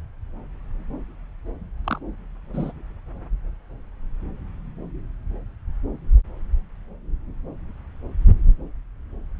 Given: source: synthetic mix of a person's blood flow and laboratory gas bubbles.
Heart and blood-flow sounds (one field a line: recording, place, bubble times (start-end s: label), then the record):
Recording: Doppler ultrasound of blood flow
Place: subclavian vein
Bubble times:
1.84-1.99 s: bubbles
2.54-2.72 s: bubbles
From the record:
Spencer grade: 1 (occasional bubble signal discernible with the cardiac motion signal, with majority of cardiac periods free of bubbles)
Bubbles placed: anywhere in the cardiac cycle